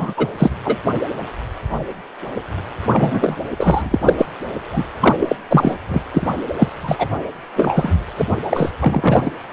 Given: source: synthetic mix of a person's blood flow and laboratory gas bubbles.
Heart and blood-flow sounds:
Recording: Doppler ultrasound of blood flow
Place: precordium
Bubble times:
0.00-0.14 s: bubbles
0.16-0.28 s: bubbles
0.38-0.50 s: bubbles
0.64-0.77 s: bubbles
2.92-3.36 s: bubbles
3.57-4.14 s: bubbles
4.18-4.26 s: bubbles
4.73-4.87 s: bubbles
5.00-5.15 s: bubbles
5.20-5.36 s: bubbles
5.49-5.79 s: bubbles
5.89-6.02 s: bubbles
6.13-6.27 s: bubbles
6.58-6.69 s: bubbles
6.83-7.08 s: bubbles
7.56-7.95 s: bubbles
8.17-8.25 s: bubbles
8.49-8.72 s: bubbles
8.79-9.31 s: bubbles
From the record:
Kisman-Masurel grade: 333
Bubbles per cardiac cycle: rolling drumbeat, 9 or more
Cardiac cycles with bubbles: 50 to 99%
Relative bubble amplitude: loud (0.450 to 0.775)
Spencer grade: 3 (all of the cardiac periods contain showers or single bubble signals, but not dominating or overriding the cardiac motion signals)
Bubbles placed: anywhere in the cardiac cycle

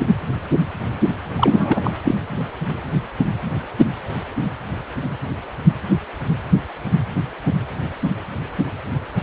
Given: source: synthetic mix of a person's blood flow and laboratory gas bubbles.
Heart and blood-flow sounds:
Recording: Doppler ultrasound of blood flow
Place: precordium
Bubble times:
1.36-1.96 s: bubbles
2.04-2.15 s: bubbles
From the record:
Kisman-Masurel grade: 213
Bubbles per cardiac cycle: several, 3 to 8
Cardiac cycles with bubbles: 1 to 10%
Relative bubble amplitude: loud (0.450 to 0.775)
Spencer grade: 1 (occasional bubble signal discernible with the cardiac motion signal, with majority of cardiac periods free of bubbles)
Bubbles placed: anywhere in the cardiac cycle

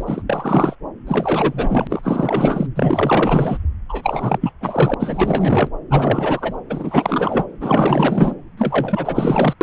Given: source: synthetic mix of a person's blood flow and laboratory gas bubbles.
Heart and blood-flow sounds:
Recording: Doppler ultrasound of blood flow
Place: subclavian vein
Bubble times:
0.00-0.22 s: bubbles
0.29-0.76 s: bubbles
1.06-2.67 s: bubbles
2.75-3.58 s: bubbles
3.89-4.51 s: bubbles
4.61-4.94 s: bubbles
4.99-5.70 s: bubbles
5.90-6.57 s: bubbles
6.69-7.46 s: bubbles
7.61-8.35 s: bubbles
8.57-9.54 s: bubbles
9.61-9.63 s: bubbles
From the record:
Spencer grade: 4 (maximum detectable bubble signal sounding continuously throughout systole and diastole of every cardiac period, and overriding the amplitude of the normal cardiac signals)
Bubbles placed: anywhere in the cardiac cycle

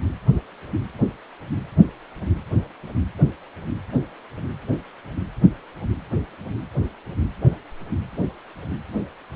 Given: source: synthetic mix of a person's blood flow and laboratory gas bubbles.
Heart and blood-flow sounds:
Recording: Doppler ultrasound of blood flow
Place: precordium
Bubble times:
no bubbles
From the record:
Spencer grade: 0 (complete lack of bubble signals)

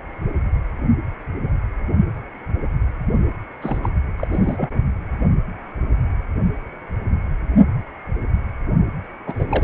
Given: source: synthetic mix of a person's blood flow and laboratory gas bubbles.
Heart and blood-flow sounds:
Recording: Doppler ultrasound of blood flow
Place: precordium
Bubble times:
3.61-3.79 s: bubbles
3.83-3.90 s: bubbles
4.18-4.27 s: bubbles
4.32-4.71 s: bubbles
9.27-9.64 s: bubbles
From the record:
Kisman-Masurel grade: 222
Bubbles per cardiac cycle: several, 3 to 8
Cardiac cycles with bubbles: 10 to 50%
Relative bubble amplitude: moderate (0.250 to 0.450)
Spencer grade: 2 (many but less than half of the cardiac periods contain bubble signals, singularly or in groups)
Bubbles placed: only in the low amplitude regions of the cardiac cycle

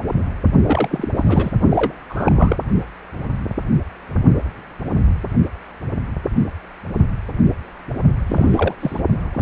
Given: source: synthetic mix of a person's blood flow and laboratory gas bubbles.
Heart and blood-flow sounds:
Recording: Doppler ultrasound of blood flow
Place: precordium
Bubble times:
0.62-1.08 s: bubbles
1.16-1.52 s: bubbles
1.70-1.94 s: bubbles
2.09-2.32 s: bubbles
2.35-2.56 s: bubbles
8.27-8.76 s: bubbles
8.80-9.00 s: bubbles
9.34-9.41 s: bubbles
From the record:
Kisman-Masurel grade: 222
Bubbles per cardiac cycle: several, 3 to 8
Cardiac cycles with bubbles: 10 to 50%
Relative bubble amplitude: moderate (0.250 to 0.450)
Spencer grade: 2 (many but less than half of the cardiac periods contain bubble signals, singularly or in groups)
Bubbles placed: only in the low amplitude regions of the cardiac cycle

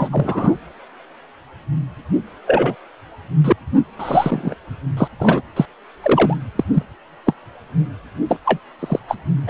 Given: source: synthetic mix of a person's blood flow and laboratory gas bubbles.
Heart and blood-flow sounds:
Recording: Doppler ultrasound of blood flow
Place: precordium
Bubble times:
0.00-0.09 s: bubbles
0.12-0.55 s: bubbles
2.47-2.75 s: bubbles
3.44-3.52 s: bubbles
3.99-4.54 s: bubbles
4.97-5.08 s: bubbles
5.20-5.42 s: bubbles
5.56-5.66 s: bubbles
6.02-6.37 s: bubbles
6.59-6.64 s: bubbles
6.73-6.83 s: bubbles
7.26-7.33 s: bubbles
8.28-8.38 s: bubbles
8.45-8.60 s: bubbles
8.79-9.00 s: bubbles
9.08-9.16 s: bubbles
9.47-9.50 s: bubbles
From the record:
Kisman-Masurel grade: 233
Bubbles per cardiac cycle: several, 3 to 8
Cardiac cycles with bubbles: 50 to 99%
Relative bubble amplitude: loud (0.450 to 0.775)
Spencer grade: 3 (all of the cardiac periods contain showers or single bubble signals, but not dominating or overriding the cardiac motion signals)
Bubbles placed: anywhere in the cardiac cycle

